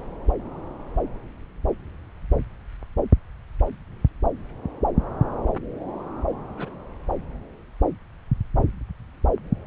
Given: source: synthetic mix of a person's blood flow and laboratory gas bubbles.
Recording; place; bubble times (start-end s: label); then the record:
Doppler ultrasound of blood flow; subclavian vein
6.56-6.82 s: bubbles
From the record:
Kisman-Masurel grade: 121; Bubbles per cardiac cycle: 1 to 2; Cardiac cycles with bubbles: 10 to 50%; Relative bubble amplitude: barely perceptible (0.100 to 0.250); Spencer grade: 2 (many but less than half of the cardiac periods contain bubble signals, singularly or in groups); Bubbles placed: anywhere in the cardiac cycle